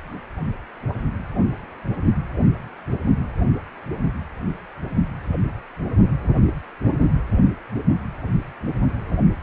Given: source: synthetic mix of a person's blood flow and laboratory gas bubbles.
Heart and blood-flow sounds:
Doppler ultrasound of blood flow; precordium
no bubbles
From the record:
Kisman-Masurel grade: 000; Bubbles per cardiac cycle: 0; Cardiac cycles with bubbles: 0%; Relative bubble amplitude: no bubbles discernible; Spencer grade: 0 (complete lack of bubble signals)

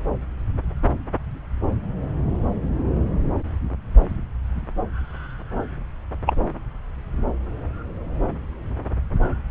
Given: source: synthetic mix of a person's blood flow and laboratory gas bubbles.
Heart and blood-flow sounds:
Doppler ultrasound of blood flow; subclavian vein
6.26-6.33 s: bubbles
From the record:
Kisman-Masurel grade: 113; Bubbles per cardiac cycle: 1 to 2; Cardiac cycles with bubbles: 1 to 10%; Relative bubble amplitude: loud (0.450 to 0.775); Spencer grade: 1 (occasional bubble signal discernible with the cardiac motion signal, with majority of cardiac periods free of bubbles); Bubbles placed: anywhere in the cardiac cycle

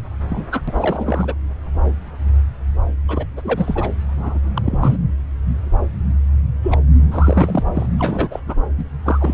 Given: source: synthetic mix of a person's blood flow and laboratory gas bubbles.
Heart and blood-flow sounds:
Doppler ultrasound of blood flow; subclavian vein
0.28-0.46 s: bubbles
0.52-0.61 s: bubbles
0.68-0.73 s: bubbles
0.77-1.34 s: bubbles
3.08-3.25 s: bubbles
3.36-3.90 s: bubbles
4.17-4.38 s: bubbles
4.55-4.96 s: bubbles
6.62-6.78 s: bubbles
7.11-7.63 s: bubbles
7.75-7.86 s: bubbles
7.98-8.40 s: bubbles
8.47-8.55 s: bubbles
8.78-8.85 s: bubbles
9.05-9.34 s: bubbles
From the record:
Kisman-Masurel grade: 332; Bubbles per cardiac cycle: rolling drumbeat, 9 or more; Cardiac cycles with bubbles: 50 to 99%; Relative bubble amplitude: moderate (0.250 to 0.450); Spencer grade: 3 (all of the cardiac periods contain showers or single bubble signals, but not dominating or overriding the cardiac motion signals); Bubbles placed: anywhere in the cardiac cycle

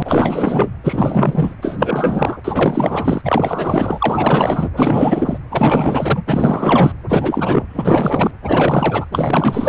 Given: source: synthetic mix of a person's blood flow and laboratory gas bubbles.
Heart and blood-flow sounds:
Doppler ultrasound of blood flow; precordium
0.00-0.69 s: bubbles
0.83-1.56 s: bubbles
1.61-2.38 s: bubbles
2.44-3.22 s: bubbles
3.25-4.69 s: bubbles
4.76-5.38 s: bubbles
5.52-6.23 s: bubbles
6.27-6.92 s: bubbles
7.08-7.66 s: bubbles
7.69-8.31 s: bubbles
8.44-9.05 s: bubbles
9.12-9.69 s: bubbles
From the record:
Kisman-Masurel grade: 444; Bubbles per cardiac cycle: continuous sound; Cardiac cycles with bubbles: 100%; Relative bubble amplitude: maximal (0.775 to 0.999); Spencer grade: 4 (maximum detectable bubble signal sounding continuously throughout systole and diastole of every cardiac period, and overriding the amplitude of the normal cardiac signals); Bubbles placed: anywhere in the cardiac cycle

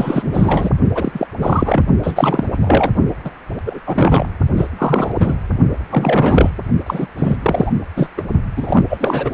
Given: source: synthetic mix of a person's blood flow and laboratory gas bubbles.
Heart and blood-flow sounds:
Doppler ultrasound of blood flow; precordium
0.00-0.71 s: bubbles
0.95-1.27 s: bubbles
1.39-1.83 s: bubbles
2.03-2.91 s: bubbles
3.24-3.31 s: bubbles
3.66-3.80 s: bubbles
3.86-4.26 s: bubbles
4.56-4.68 s: bubbles
4.78-5.34 s: bubbles
5.90-6.50 s: bubbles
6.86-7.07 s: bubbles
7.17-7.37 s: bubbles
7.42-7.72 s: bubbles
7.96-8.08 s: bubbles
8.17-8.23 s: bubbles
8.56-9.31 s: bubbles
From the record:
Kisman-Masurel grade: 343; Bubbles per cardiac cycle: rolling drumbeat, 9 or more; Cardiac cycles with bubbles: 100%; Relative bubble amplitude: loud (0.450 to 0.775); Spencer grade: 3 (all of the cardiac periods contain showers or single bubble signals, but not dominating or overriding the cardiac motion signals); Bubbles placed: only in the low amplitude regions of the cardiac cycle

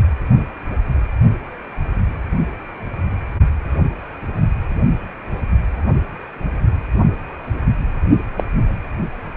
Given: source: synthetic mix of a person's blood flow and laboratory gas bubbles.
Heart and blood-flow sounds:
Doppler ultrasound of blood flow; precordium
8.37-8.43 s: bubbles
From the record:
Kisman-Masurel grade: 123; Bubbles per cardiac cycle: 1 to 2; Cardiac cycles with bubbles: 10 to 50%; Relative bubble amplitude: loud (0.450 to 0.775); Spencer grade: 2 (many but less than half of the cardiac periods contain bubble signals, singularly or in groups); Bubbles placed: only in the low amplitude regions of the cardiac cycle

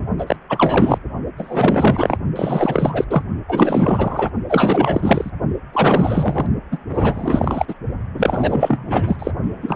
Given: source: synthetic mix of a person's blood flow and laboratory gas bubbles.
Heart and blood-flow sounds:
Doppler ultrasound of blood flow; precordium
0.18-0.36 s: bubbles
0.49-0.98 s: bubbles
1.38-2.17 s: bubbles
2.36-3.05 s: bubbles
3.10-3.23 s: bubbles
3.48-4.29 s: bubbles
4.49-5.30 s: bubbles
5.73-6.46 s: bubbles
6.71-6.78 s: bubbles
6.89-7.75 s: bubbles
8.14-9.31 s: bubbles
9.43-9.76 s: bubbles
From the record:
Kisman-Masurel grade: 444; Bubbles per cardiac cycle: continuous sound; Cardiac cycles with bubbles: 100%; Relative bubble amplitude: maximal (0.775 to 0.999); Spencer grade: 4 (maximum detectable bubble signal sounding continuously throughout systole and diastole of every cardiac period, and overriding the amplitude of the normal cardiac signals); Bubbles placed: only in the low amplitude regions of the cardiac cycle

